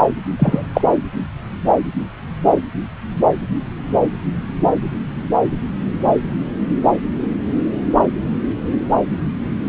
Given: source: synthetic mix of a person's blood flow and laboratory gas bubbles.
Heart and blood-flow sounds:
Doppler ultrasound of blood flow; subclavian vein
0.39-0.66 s: bubbles
0.73-0.81 s: bubbles
From the record:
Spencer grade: 1 (occasional bubble signal discernible with the cardiac motion signal, with majority of cardiac periods free of bubbles); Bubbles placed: anywhere in the cardiac cycle

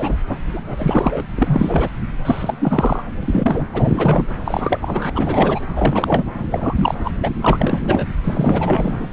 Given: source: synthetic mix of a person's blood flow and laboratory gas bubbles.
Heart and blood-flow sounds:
Doppler ultrasound of blood flow; subclavian vein
0.00-0.17 s: bubbles
0.26-0.36 s: bubbles
0.53-1.23 s: bubbles
1.36-1.89 s: bubbles
2.25-3.02 s: bubbles
3.23-3.66 s: bubbles
3.73-4.27 s: bubbles
4.45-5.10 s: bubbles
5.14-5.60 s: bubbles
5.75-6.27 s: bubbles
6.51-6.95 s: bubbles
7.04-7.11 s: bubbles
7.22-7.30 s: bubbles
7.41-8.05 s: bubbles
8.24-9.07 s: bubbles
From the record:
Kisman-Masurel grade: 343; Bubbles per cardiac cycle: rolling drumbeat, 9 or more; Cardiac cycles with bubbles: 100%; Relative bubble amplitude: loud (0.450 to 0.775); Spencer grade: 3 (all of the cardiac periods contain showers or single bubble signals, but not dominating or overriding the cardiac motion signals); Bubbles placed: anywhere in the cardiac cycle

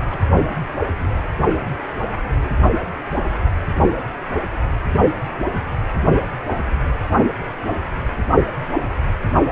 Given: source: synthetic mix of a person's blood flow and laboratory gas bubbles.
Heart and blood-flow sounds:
Doppler ultrasound of blood flow; precordium
0.10-0.20 s: bubbles
From the record:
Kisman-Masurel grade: 211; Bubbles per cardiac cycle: several, 3 to 8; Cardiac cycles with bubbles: 1 to 10%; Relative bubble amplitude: barely perceptible (0.100 to 0.250); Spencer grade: 1 (occasional bubble signal discernible with the cardiac motion signal, with majority of cardiac periods free of bubbles); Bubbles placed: only in the low amplitude regions of the cardiac cycle

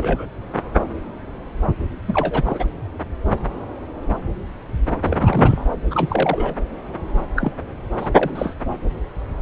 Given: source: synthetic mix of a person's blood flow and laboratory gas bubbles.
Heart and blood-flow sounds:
Doppler ultrasound of blood flow; subclavian vein
0.00-0.26 s: bubbles
2.07-2.71 s: bubbles
5.04-5.64 s: bubbles
5.90-6.55 s: bubbles
7.36-7.52 s: bubbles
7.98-8.10 s: bubbles
8.18-8.54 s: bubbles
From the record:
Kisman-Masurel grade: 232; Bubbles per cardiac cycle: several, 3 to 8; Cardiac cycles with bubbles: 50 to 99%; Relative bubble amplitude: moderate (0.250 to 0.450); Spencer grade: 3 (all of the cardiac periods contain showers or single bubble signals, but not dominating or overriding the cardiac motion signals); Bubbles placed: anywhere in the cardiac cycle

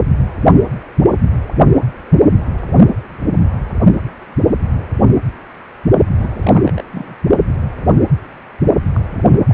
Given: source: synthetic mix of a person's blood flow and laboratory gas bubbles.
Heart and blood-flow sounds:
Doppler ultrasound of blood flow; precordium
6.19-6.84 s: bubbles
6.92-7.18 s: bubbles
8.95-9.00 s: bubbles
9.12-9.24 s: bubbles
9.31-9.41 s: bubbles
9.47-9.54 s: bubbles
From the record:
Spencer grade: 2 (many but less than half of the cardiac periods contain bubble signals, singularly or in groups); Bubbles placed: only in the low amplitude regions of the cardiac cycle

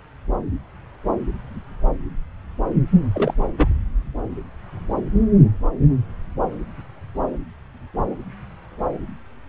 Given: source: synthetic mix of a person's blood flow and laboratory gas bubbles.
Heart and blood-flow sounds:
Doppler ultrasound of blood flow; subclavian vein
3.14-3.34 s: bubbles
3.57-3.69 s: bubbles
From the record:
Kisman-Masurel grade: 212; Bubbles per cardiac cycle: several, 3 to 8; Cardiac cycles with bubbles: 1 to 10%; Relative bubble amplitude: moderate (0.250 to 0.450); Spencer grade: 1 (occasional bubble signal discernible with the cardiac motion signal, with majority of cardiac periods free of bubbles); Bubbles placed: anywhere in the cardiac cycle

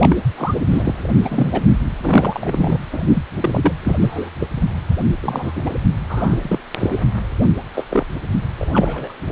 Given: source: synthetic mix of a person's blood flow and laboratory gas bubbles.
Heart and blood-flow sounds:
Doppler ultrasound of blood flow; precordium
0.00-0.17 s: bubbles
0.38-0.55 s: bubbles
0.70-0.92 s: bubbles
1.25-1.64 s: bubbles
2.02-2.80 s: bubbles
2.92-3.23 s: bubbles
3.40-3.73 s: bubbles
3.83-3.98 s: bubbles
4.02-4.30 s: bubbles
4.40-4.48 s: bubbles
5.21-5.74 s: bubbles
6.09-6.59 s: bubbles
6.79-7.03 s: bubbles
7.74-7.84 s: bubbles
7.91-8.06 s: bubbles
8.59-9.14 s: bubbles
From the record:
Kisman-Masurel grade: 242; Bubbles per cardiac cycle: several, 3 to 8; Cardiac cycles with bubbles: 100%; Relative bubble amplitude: moderate (0.250 to 0.450); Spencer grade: 3 (all of the cardiac periods contain showers or single bubble signals, but not dominating or overriding the cardiac motion signals); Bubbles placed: anywhere in the cardiac cycle

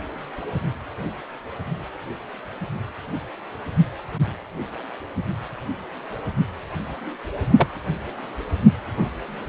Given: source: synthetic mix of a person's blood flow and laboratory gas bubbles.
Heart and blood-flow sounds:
Doppler ultrasound of blood flow; precordium
7.56-7.67 s: bubbles
From the record:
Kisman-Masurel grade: 122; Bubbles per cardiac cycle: 1 to 2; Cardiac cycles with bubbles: 10 to 50%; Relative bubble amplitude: moderate (0.250 to 0.450); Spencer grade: 2 (many but less than half of the cardiac periods contain bubble signals, singularly or in groups); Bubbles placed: only in the low amplitude regions of the cardiac cycle

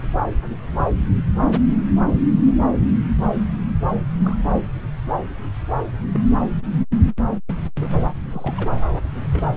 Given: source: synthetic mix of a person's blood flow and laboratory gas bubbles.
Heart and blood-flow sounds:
Doppler ultrasound of blood flow; subclavian vein
2.40-2.54 s: bubbles
4.23-4.37 s: bubbles
6.09-6.20 s: bubbles
7.80-7.89 s: bubbles
7.97-8.06 s: bubbles
8.30-8.69 s: bubbles
9.33-9.57 s: bubbles
From the record:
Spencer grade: 2 (many but less than half of the cardiac periods contain bubble signals, singularly or in groups); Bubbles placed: anywhere in the cardiac cycle

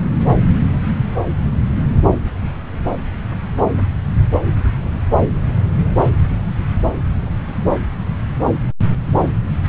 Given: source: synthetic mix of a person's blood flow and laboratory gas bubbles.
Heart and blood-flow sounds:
Doppler ultrasound of blood flow; subclavian vein
0.71-0.81 s: bubbles
0.98-1.06 s: bubbles
From the record:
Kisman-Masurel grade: 121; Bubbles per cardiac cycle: 1 to 2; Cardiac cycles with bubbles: 10 to 50%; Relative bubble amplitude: barely perceptible (0.100 to 0.250); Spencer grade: 2 (many but less than half of the cardiac periods contain bubble signals, singularly or in groups); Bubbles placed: anywhere in the cardiac cycle

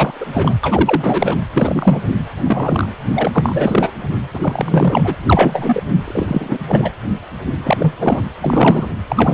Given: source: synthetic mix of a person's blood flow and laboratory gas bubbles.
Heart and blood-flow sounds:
Doppler ultrasound of blood flow; precordium
0.00-0.26 s: bubbles
0.32-0.53 s: bubbles
0.63-1.37 s: bubbles
1.53-2.01 s: bubbles
2.08-2.14 s: bubbles
2.43-2.89 s: bubbles
3.15-3.90 s: bubbles
4.33-5.16 s: bubbles
5.25-5.83 s: bubbles
6.04-6.58 s: bubbles
6.67-6.92 s: bubbles
7.64-7.94 s: bubbles
8.00-8.23 s: bubbles
8.42-8.87 s: bubbles
9.08-9.34 s: bubbles
From the record:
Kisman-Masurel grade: 333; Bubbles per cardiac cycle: rolling drumbeat, 9 or more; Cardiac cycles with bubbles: 50 to 99%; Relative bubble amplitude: loud (0.450 to 0.775); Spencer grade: 3 (all of the cardiac periods contain showers or single bubble signals, but not dominating or overriding the cardiac motion signals); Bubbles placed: anywhere in the cardiac cycle

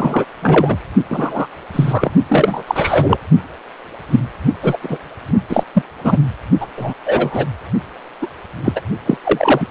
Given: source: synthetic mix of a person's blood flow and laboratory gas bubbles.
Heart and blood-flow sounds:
Doppler ultrasound of blood flow; precordium
0.00-0.26 s: bubbles
0.42-0.77 s: bubbles
1.09-1.47 s: bubbles
1.73-2.12 s: bubbles
2.29-2.64 s: bubbles
2.67-3.17 s: bubbles
4.11-4.20 s: bubbles
4.62-4.77 s: bubbles
4.82-4.98 s: bubbles
5.49-5.63 s: bubbles
5.74-5.82 s: bubbles
6.00-6.18 s: bubbles
6.60-6.66 s: bubbles
6.76-6.93 s: bubbles
7.04-7.48 s: bubbles
8.22-8.27 s: bubbles
8.64-8.72 s: bubbles
8.75-8.81 s: bubbles
9.05-9.17 s: bubbles
9.23-9.68 s: bubbles
From the record:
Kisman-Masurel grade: 243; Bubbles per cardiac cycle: several, 3 to 8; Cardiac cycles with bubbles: 100%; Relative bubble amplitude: loud (0.450 to 0.775); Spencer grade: 3 (all of the cardiac periods contain showers or single bubble signals, but not dominating or overriding the cardiac motion signals); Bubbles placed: only in the low amplitude regions of the cardiac cycle

